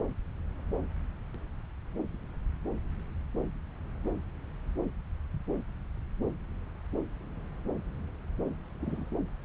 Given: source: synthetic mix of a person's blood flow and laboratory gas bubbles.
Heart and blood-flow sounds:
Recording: Doppler ultrasound of blood flow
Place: subclavian vein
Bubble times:
8.80-9.09 s: bubbles
From the record:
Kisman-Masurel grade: 111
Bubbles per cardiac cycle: 1 to 2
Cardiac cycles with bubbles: 1 to 10%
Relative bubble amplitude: barely perceptible (0.100 to 0.250)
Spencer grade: 1 (occasional bubble signal discernible with the cardiac motion signal, with majority of cardiac periods free of bubbles)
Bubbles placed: anywhere in the cardiac cycle

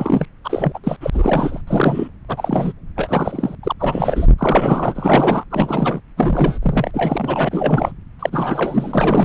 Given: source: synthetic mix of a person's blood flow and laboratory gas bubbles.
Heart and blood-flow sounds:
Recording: Doppler ultrasound of blood flow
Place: subclavian vein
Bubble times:
0.00-0.26 s: bubbles
0.44-0.79 s: bubbles
0.83-0.97 s: bubbles
1.01-1.61 s: bubbles
1.67-2.08 s: bubbles
2.28-2.72 s: bubbles
2.96-3.55 s: bubbles
3.63-3.73 s: bubbles
3.79-4.27 s: bubbles
4.38-5.45 s: bubbles
5.50-6.00 s: bubbles
6.17-6.58 s: bubbles
6.62-6.91 s: bubbles
6.94-7.92 s: bubbles
8.19-9.25 s: bubbles
From the record:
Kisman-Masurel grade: 343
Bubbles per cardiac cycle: rolling drumbeat, 9 or more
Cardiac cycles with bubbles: 100%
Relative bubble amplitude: loud (0.450 to 0.775)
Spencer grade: 3 (all of the cardiac periods contain showers or single bubble signals, but not dominating or overriding the cardiac motion signals)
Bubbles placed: anywhere in the cardiac cycle

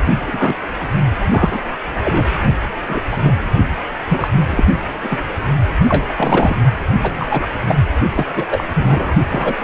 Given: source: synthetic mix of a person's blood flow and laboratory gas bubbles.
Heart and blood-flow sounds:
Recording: Doppler ultrasound of blood flow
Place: precordium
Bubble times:
0.27-0.56 s: bubbles
0.79-0.88 s: bubbles
1.30-1.60 s: bubbles
2.04-2.29 s: bubbles
2.88-3.00 s: bubbles
3.09-3.33 s: bubbles
4.09-4.28 s: bubbles
4.51-4.64 s: bubbles
5.03-5.22 s: bubbles
5.83-6.05 s: bubbles
6.08-6.13 s: bubbles
6.16-6.56 s: bubbles
7.00-7.26 s: bubbles
7.30-7.47 s: bubbles
7.67-7.75 s: bubbles
8.16-8.25 s: bubbles
8.36-8.46 s: bubbles
8.50-8.64 s: bubbles
8.74-9.15 s: bubbles
9.30-9.64 s: bubbles
From the record:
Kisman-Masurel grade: 243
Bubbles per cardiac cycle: several, 3 to 8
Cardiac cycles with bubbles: 100%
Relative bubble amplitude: loud (0.450 to 0.775)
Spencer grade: 3 (all of the cardiac periods contain showers or single bubble signals, but not dominating or overriding the cardiac motion signals)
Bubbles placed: only in the low amplitude regions of the cardiac cycle

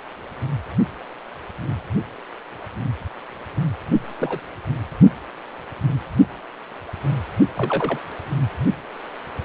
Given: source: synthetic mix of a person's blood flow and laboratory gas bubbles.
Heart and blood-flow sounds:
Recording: Doppler ultrasound of blood flow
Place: precordium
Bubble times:
4.16-4.41 s: bubbles
7.57-7.99 s: bubbles
From the record:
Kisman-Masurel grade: 122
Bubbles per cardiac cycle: 1 to 2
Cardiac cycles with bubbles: 10 to 50%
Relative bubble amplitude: moderate (0.250 to 0.450)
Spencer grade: 2 (many but less than half of the cardiac periods contain bubble signals, singularly or in groups)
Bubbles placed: only in the low amplitude regions of the cardiac cycle

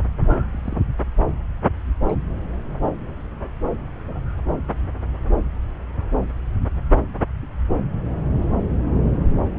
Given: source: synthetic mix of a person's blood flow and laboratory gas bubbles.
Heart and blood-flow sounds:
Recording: Doppler ultrasound of blood flow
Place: subclavian vein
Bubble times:
0.52-0.80 s: bubbles
2.06-2.18 s: bubbles
4.07-4.19 s: bubbles
From the record:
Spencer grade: 2 (many but less than half of the cardiac periods contain bubble signals, singularly or in groups)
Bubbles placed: anywhere in the cardiac cycle

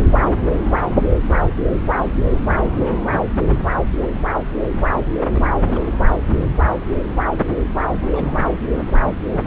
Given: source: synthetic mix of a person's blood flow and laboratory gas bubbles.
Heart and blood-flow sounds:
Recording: Doppler ultrasound of blood flow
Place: subclavian vein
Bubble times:
2.80-3.02 s: bubbles
3.50-3.60 s: bubbles
4.01-4.09 s: bubbles
5.24-5.29 s: bubbles
5.32-5.48 s: bubbles
5.66-5.90 s: bubbles
7.50-7.63 s: bubbles
7.89-8.48 s: bubbles
8.72-8.92 s: bubbles
8.99-9.15 s: bubbles
9.29-9.42 s: bubbles
From the record:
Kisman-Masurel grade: 221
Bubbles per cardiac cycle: several, 3 to 8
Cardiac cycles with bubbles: 10 to 50%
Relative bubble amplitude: barely perceptible (0.100 to 0.250)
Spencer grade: 2 (many but less than half of the cardiac periods contain bubble signals, singularly or in groups)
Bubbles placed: anywhere in the cardiac cycle

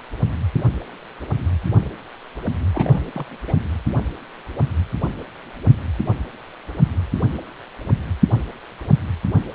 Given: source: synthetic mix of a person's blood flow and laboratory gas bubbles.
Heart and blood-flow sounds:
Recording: Doppler ultrasound of blood flow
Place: precordium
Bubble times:
2.74-3.26 s: bubbles
3.47-3.54 s: bubbles
From the record:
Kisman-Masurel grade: 211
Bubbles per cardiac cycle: several, 3 to 8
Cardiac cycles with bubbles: 1 to 10%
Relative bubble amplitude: barely perceptible (0.100 to 0.250)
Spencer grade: 1 (occasional bubble signal discernible with the cardiac motion signal, with majority of cardiac periods free of bubbles)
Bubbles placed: anywhere in the cardiac cycle

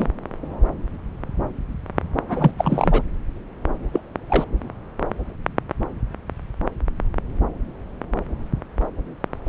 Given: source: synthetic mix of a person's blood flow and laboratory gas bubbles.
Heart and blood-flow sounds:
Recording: Doppler ultrasound of blood flow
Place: subclavian vein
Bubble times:
0.00-0.07 s: bubbles
2.28-2.55 s: bubbles
2.58-3.02 s: bubbles
3.93-4.00 s: bubbles
4.29-4.45 s: bubbles
9.46-9.49 s: bubbles
From the record:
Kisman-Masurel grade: 222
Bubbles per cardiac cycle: several, 3 to 8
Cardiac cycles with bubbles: 10 to 50%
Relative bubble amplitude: moderate (0.250 to 0.450)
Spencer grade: 2 (many but less than half of the cardiac periods contain bubble signals, singularly or in groups)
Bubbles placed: anywhere in the cardiac cycle

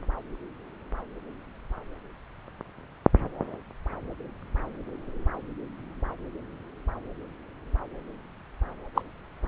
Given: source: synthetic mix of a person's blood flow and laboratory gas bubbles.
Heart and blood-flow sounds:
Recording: Doppler ultrasound of blood flow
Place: subclavian vein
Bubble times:
8.95-9.01 s: bubbles
From the record:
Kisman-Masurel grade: 122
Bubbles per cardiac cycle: 1 to 2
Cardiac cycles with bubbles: 10 to 50%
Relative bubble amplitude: moderate (0.250 to 0.450)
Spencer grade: 2 (many but less than half of the cardiac periods contain bubble signals, singularly or in groups)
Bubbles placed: anywhere in the cardiac cycle

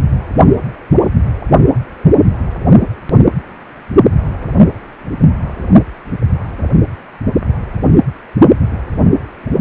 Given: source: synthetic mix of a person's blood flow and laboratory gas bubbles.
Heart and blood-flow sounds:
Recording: Doppler ultrasound of blood flow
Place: precordium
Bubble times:
no bubbles
From the record:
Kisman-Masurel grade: 000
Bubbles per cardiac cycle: 0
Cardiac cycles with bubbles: 0%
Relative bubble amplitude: no bubbles discernible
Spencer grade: 0 (complete lack of bubble signals)

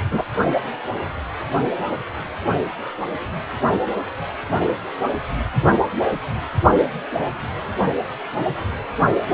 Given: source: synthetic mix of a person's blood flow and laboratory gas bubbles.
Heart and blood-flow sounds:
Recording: Doppler ultrasound of blood flow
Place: precordium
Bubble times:
0.12-0.22 s: bubbles
From the record:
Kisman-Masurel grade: 213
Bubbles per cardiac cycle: several, 3 to 8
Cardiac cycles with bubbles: 1 to 10%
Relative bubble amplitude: loud (0.450 to 0.775)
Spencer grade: 1 (occasional bubble signal discernible with the cardiac motion signal, with majority of cardiac periods free of bubbles)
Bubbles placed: only in the low amplitude regions of the cardiac cycle

